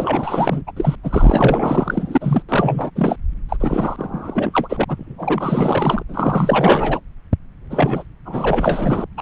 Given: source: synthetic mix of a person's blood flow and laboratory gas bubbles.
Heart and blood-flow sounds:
Doppler ultrasound of blood flow; subclavian vein
0.00-0.62 s: bubbles
0.67-0.72 s: bubbles
0.76-0.96 s: bubbles
1.03-2.42 s: bubbles
2.48-2.90 s: bubbles
2.95-3.17 s: bubbles
3.48-3.56 s: bubbles
3.60-4.84 s: bubbles
4.88-6.03 s: bubbles
6.08-7.00 s: bubbles
7.70-8.04 s: bubbles
8.25-9.05 s: bubbles
9.17-9.22 s: bubbles
From the record:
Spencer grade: 4 (maximum detectable bubble signal sounding continuously throughout systole and diastole of every cardiac period, and overriding the amplitude of the normal cardiac signals); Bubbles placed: anywhere in the cardiac cycle

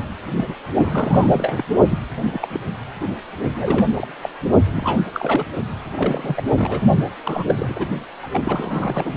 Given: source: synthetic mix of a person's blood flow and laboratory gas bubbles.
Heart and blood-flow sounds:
Doppler ultrasound of blood flow; precordium
0.33-0.53 s: bubbles
0.84-1.64 s: bubbles
1.89-1.99 s: bubbles
2.23-2.59 s: bubbles
3.00-3.16 s: bubbles
3.54-3.87 s: bubbles
3.97-4.08 s: bubbles
4.22-4.29 s: bubbles
4.75-5.04 s: bubbles
5.14-5.46 s: bubbles
5.95-6.43 s: bubbles
6.51-6.82 s: bubbles
7.24-7.89 s: bubbles
8.22-8.29 s: bubbles
8.32-9.13 s: bubbles
From the record:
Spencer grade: 3 (all of the cardiac periods contain showers or single bubble signals, but not dominating or overriding the cardiac motion signals); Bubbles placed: only in the low amplitude regions of the cardiac cycle

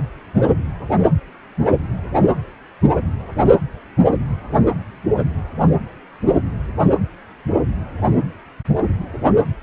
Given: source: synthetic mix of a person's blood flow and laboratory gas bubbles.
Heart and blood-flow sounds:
Doppler ultrasound of blood flow; precordium
no bubbles
From the record:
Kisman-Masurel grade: 000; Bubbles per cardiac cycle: 0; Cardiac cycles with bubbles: 0%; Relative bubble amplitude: no bubbles discernible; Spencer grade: 0 (complete lack of bubble signals)

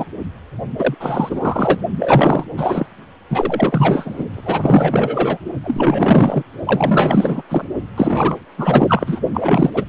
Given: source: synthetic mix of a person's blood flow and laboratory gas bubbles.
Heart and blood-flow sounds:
Doppler ultrasound of blood flow; precordium
0.00-0.06 s: bubbles
0.78-0.95 s: bubbles
1.00-1.81 s: bubbles
1.99-2.44 s: bubbles
2.57-2.86 s: bubbles
3.30-4.25 s: bubbles
4.33-5.38 s: bubbles
5.63-6.43 s: bubbles
6.65-7.42 s: bubbles
7.49-7.64 s: bubbles
7.96-8.38 s: bubbles
8.57-9.21 s: bubbles
9.33-9.85 s: bubbles
From the record:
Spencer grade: 4 (maximum detectable bubble signal sounding continuously throughout systole and diastole of every cardiac period, and overriding the amplitude of the normal cardiac signals); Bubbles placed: only in the low amplitude regions of the cardiac cycle

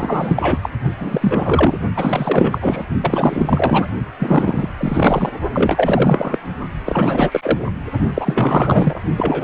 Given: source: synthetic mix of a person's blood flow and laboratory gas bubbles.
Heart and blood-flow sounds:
Doppler ultrasound of blood flow; precordium
0.00-0.59 s: bubbles
0.62-0.70 s: bubbles
0.98-1.77 s: bubbles
1.96-2.84 s: bubbles
3.01-3.91 s: bubbles
4.19-4.68 s: bubbles
4.78-5.29 s: bubbles
5.53-6.38 s: bubbles
6.86-7.59 s: bubbles
8.14-9.00 s: bubbles
9.17-9.44 s: bubbles
From the record:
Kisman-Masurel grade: 444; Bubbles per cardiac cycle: continuous sound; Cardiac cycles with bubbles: 100%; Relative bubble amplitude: maximal (0.775 to 0.999); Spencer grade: 4 (maximum detectable bubble signal sounding continuously throughout systole and diastole of every cardiac period, and overriding the amplitude of the normal cardiac signals); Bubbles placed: only in the low amplitude regions of the cardiac cycle

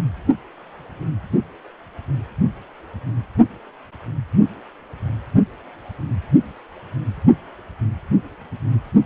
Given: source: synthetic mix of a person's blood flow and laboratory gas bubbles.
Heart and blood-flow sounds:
Doppler ultrasound of blood flow; precordium
no bubbles
From the record:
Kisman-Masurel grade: 000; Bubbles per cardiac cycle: 0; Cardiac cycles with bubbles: 0%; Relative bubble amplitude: no bubbles discernible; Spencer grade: 0 (complete lack of bubble signals)

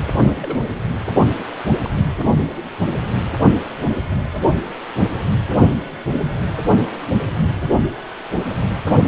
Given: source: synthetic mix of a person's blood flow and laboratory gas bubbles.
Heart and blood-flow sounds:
Doppler ultrasound of blood flow; precordium
0.25-0.59 s: bubbles
1.38-1.45 s: bubbles
1.84-1.90 s: bubbles
6.94-7.00 s: bubbles
From the record:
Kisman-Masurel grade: 121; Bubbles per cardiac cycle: 1 to 2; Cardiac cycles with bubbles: 10 to 50%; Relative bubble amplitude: barely perceptible (0.100 to 0.250); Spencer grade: 2 (many but less than half of the cardiac periods contain bubble signals, singularly or in groups); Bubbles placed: only in the low amplitude regions of the cardiac cycle

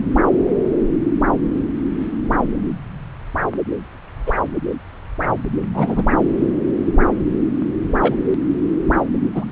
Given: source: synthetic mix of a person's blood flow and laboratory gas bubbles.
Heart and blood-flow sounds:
Doppler ultrasound of blood flow; subclavian vein
4.26-4.33 s: bubbles
5.74-6.03 s: bubbles
8.00-8.15 s: bubbles
9.34-9.44 s: bubbles
From the record:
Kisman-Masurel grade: 123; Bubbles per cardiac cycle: 1 to 2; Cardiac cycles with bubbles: 10 to 50%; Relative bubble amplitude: loud (0.450 to 0.775); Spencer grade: 2 (many but less than half of the cardiac periods contain bubble signals, singularly or in groups); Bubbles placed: anywhere in the cardiac cycle

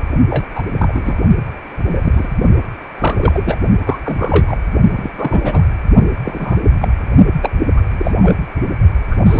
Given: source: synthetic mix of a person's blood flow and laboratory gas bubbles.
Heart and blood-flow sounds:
Doppler ultrasound of blood flow; precordium
0.30-0.44 s: bubbles
0.54-0.62 s: bubbles
0.78-1.18 s: bubbles
1.82-2.29 s: bubbles
2.98-3.58 s: bubbles
3.86-3.98 s: bubbles
4.05-4.45 s: bubbles
4.47-4.57 s: bubbles
4.96-5.64 s: bubbles
6.24-6.61 s: bubbles
6.81-6.88 s: bubbles
7.41-7.51 s: bubbles
7.77-7.81 s: bubbles
7.98-8.34 s: bubbles
9.11-9.17 s: bubbles
9.26-9.40 s: bubbles
From the record:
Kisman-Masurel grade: 242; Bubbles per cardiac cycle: several, 3 to 8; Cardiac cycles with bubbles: 100%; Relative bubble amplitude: moderate (0.250 to 0.450); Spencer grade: 3 (all of the cardiac periods contain showers or single bubble signals, but not dominating or overriding the cardiac motion signals); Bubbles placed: only in the low amplitude regions of the cardiac cycle

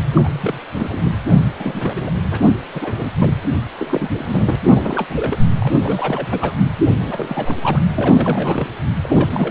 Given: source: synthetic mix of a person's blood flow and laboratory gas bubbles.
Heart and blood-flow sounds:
Doppler ultrasound of blood flow; precordium
0.14-0.59 s: bubbles
0.74-1.09 s: bubbles
1.29-1.39 s: bubbles
1.59-2.11 s: bubbles
2.31-2.52 s: bubbles
2.73-3.12 s: bubbles
3.17-3.33 s: bubbles
3.79-4.56 s: bubbles
4.73-5.38 s: bubbles
5.59-6.27 s: bubbles
6.30-6.54 s: bubbles
6.87-7.56 s: bubbles
7.62-7.81 s: bubbles
7.94-8.70 s: bubbles
9.04-9.51 s: bubbles
From the record:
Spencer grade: 3 (all of the cardiac periods contain showers or single bubble signals, but not dominating or overriding the cardiac motion signals); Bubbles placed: anywhere in the cardiac cycle

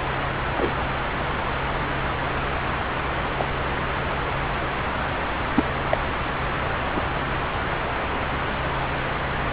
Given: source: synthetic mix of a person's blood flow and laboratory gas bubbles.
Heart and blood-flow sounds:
Doppler ultrasound of blood flow; subclavian vein
0.56-0.73 s: bubbles
0.79-0.85 s: bubbles
3.38-3.44 s: bubbles
5.56-5.65 s: bubbles
5.90-5.98 s: bubbles
6.93-7.01 s: bubbles
From the record:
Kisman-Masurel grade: 122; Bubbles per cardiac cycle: 1 to 2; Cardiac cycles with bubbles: 10 to 50%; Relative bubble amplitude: moderate (0.250 to 0.450); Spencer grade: 2 (many but less than half of the cardiac periods contain bubble signals, singularly or in groups); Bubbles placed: anywhere in the cardiac cycle

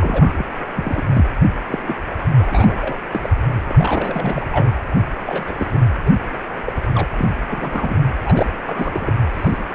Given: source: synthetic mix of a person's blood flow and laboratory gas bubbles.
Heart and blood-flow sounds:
Doppler ultrasound of blood flow; precordium
0.00-0.44 s: bubbles
0.76-1.04 s: bubbles
1.14-1.25 s: bubbles
1.67-1.79 s: bubbles
1.86-1.95 s: bubbles
2.09-2.16 s: bubbles
2.38-3.04 s: bubbles
3.11-3.29 s: bubbles
3.70-4.71 s: bubbles
5.26-5.54 s: bubbles
5.58-5.79 s: bubbles
6.05-6.11 s: bubbles
6.64-6.72 s: bubbles
6.93-7.08 s: bubbles
7.17-7.29 s: bubbles
7.48-7.97 s: bubbles
8.27-8.46 s: bubbles
8.65-9.13 s: bubbles
9.15-9.20 s: bubbles
9.33-9.58 s: bubbles
9.61-9.65 s: bubbles
From the record:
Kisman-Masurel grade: 242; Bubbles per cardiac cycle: several, 3 to 8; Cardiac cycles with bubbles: 100%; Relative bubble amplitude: moderate (0.250 to 0.450); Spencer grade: 3 (all of the cardiac periods contain showers or single bubble signals, but not dominating or overriding the cardiac motion signals); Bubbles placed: anywhere in the cardiac cycle

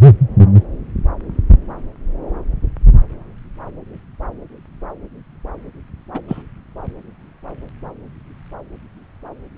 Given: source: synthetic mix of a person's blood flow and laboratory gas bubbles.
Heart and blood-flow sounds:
Doppler ultrasound of blood flow; subclavian vein
6.14-6.20 s: bubbles
6.28-6.43 s: bubbles
From the record:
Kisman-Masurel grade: 122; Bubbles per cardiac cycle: 1 to 2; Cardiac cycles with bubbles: 10 to 50%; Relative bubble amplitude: moderate (0.250 to 0.450); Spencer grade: 2 (many but less than half of the cardiac periods contain bubble signals, singularly or in groups); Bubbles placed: anywhere in the cardiac cycle

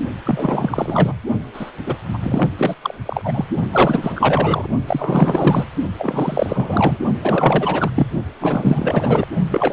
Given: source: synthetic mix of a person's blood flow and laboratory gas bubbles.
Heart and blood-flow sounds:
Doppler ultrasound of blood flow; precordium
0.24-1.14 s: bubbles
1.53-1.71 s: bubbles
1.86-1.95 s: bubbles
2.13-2.50 s: bubbles
2.57-2.75 s: bubbles
2.82-2.95 s: bubbles
3.06-3.45 s: bubbles
3.72-4.69 s: bubbles
4.87-5.68 s: bubbles
5.98-6.98 s: bubbles
7.21-7.91 s: bubbles
7.95-8.06 s: bubbles
8.40-9.27 s: bubbles
9.51-9.73 s: bubbles
From the record:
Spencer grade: 4 (maximum detectable bubble signal sounding continuously throughout systole and diastole of every cardiac period, and overriding the amplitude of the normal cardiac signals); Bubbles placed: only in the low amplitude regions of the cardiac cycle

